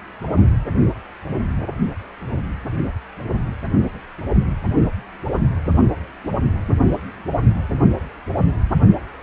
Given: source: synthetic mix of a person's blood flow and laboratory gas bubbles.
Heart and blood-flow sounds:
Doppler ultrasound of blood flow; precordium
8.90-8.95 s: bubbles
From the record:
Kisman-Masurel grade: 112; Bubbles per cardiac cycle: 1 to 2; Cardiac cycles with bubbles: 1 to 10%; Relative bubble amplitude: moderate (0.250 to 0.450); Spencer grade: 1 (occasional bubble signal discernible with the cardiac motion signal, with majority of cardiac periods free of bubbles); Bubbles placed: anywhere in the cardiac cycle

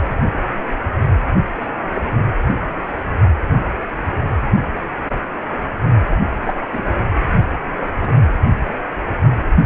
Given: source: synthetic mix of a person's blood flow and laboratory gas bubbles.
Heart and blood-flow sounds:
Doppler ultrasound of blood flow; precordium
6.45-6.54 s: bubbles
6.72-6.83 s: bubbles
8.00-8.25 s: bubbles
From the record:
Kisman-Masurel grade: 122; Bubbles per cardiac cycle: 1 to 2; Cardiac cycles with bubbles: 10 to 50%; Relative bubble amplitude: moderate (0.250 to 0.450); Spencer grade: 2 (many but less than half of the cardiac periods contain bubble signals, singularly or in groups); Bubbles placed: only in the low amplitude regions of the cardiac cycle

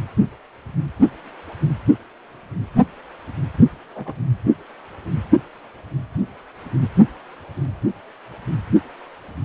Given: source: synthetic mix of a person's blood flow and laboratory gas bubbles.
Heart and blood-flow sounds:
Doppler ultrasound of blood flow; precordium
3.95-4.25 s: bubbles
From the record:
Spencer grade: 1 (occasional bubble signal discernible with the cardiac motion signal, with majority of cardiac periods free of bubbles); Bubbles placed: only in the low amplitude regions of the cardiac cycle

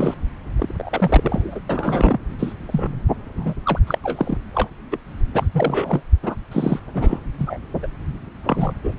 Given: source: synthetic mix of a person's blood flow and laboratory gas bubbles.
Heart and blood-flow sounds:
Doppler ultrasound of blood flow; subclavian vein
0.00-0.14 s: bubbles
0.58-0.74 s: bubbles
0.78-1.60 s: bubbles
1.69-2.18 s: bubbles
2.39-2.54 s: bubbles
2.67-3.01 s: bubbles
3.37-3.54 s: bubbles
3.63-3.79 s: bubbles
3.87-3.99 s: bubbles
4.04-4.38 s: bubbles
4.54-4.70 s: bubbles
4.91-4.98 s: bubbles
5.33-5.49 s: bubbles
5.52-6.03 s: bubbles
6.22-6.36 s: bubbles
6.51-6.79 s: bubbles
6.93-7.20 s: bubbles
7.38-7.58 s: bubbles
7.83-7.86 s: bubbles
8.43-8.73 s: bubbles
8.83-8.94 s: bubbles
From the record:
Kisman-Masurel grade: 242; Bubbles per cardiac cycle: several, 3 to 8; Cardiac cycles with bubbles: 100%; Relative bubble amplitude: moderate (0.250 to 0.450); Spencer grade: 3 (all of the cardiac periods contain showers or single bubble signals, but not dominating or overriding the cardiac motion signals); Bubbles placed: anywhere in the cardiac cycle

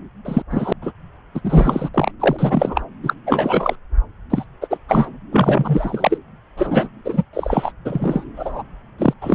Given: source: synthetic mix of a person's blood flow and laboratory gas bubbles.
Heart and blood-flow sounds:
Doppler ultrasound of blood flow; subclavian vein
0.25-0.42 s: bubbles
0.51-0.72 s: bubbles
0.81-0.92 s: bubbles
1.34-1.41 s: bubbles
1.44-1.89 s: bubbles
1.94-2.11 s: bubbles
2.19-2.81 s: bubbles
3.02-3.13 s: bubbles
3.26-3.75 s: bubbles
4.30-4.45 s: bubbles
4.61-4.78 s: bubbles
4.89-5.08 s: bubbles
5.32-6.18 s: bubbles
6.58-6.88 s: bubbles
7.04-7.23 s: bubbles
7.33-7.72 s: bubbles
7.84-8.24 s: bubbles
8.36-8.63 s: bubbles
8.98-9.13 s: bubbles
9.21-9.35 s: bubbles
From the record:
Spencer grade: 3 (all of the cardiac periods contain showers or single bubble signals, but not dominating or overriding the cardiac motion signals); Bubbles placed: anywhere in the cardiac cycle

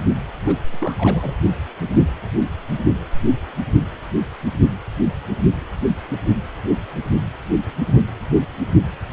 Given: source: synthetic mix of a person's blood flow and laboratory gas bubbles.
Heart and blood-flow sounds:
Doppler ultrasound of blood flow; precordium
0.46-0.57 s: bubbles
0.68-1.35 s: bubbles
From the record:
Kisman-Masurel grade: 211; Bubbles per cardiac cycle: several, 3 to 8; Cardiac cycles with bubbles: 1 to 10%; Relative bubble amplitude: barely perceptible (0.100 to 0.250); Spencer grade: 1 (occasional bubble signal discernible with the cardiac motion signal, with majority of cardiac periods free of bubbles); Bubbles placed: anywhere in the cardiac cycle

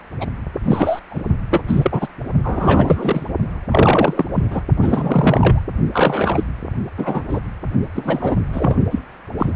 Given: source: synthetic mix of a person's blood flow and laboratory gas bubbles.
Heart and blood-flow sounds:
Doppler ultrasound of blood flow; precordium
0.20-0.26 s: bubbles
0.64-0.99 s: bubbles
1.10-1.23 s: bubbles
1.50-1.62 s: bubbles
1.68-2.08 s: bubbles
2.44-3.25 s: bubbles
3.71-4.25 s: bubbles
4.34-4.45 s: bubbles
4.50-4.60 s: bubbles
4.81-5.63 s: bubbles
5.92-6.43 s: bubbles
6.97-7.23 s: bubbles
7.29-7.39 s: bubbles
7.95-8.41 s: bubbles
8.52-8.77 s: bubbles
8.91-8.99 s: bubbles
9.38-9.52 s: bubbles
From the record:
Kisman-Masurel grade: 243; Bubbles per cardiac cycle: several, 3 to 8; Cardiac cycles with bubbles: 100%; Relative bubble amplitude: loud (0.450 to 0.775); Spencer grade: 3 (all of the cardiac periods contain showers or single bubble signals, but not dominating or overriding the cardiac motion signals); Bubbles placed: only in the low amplitude regions of the cardiac cycle

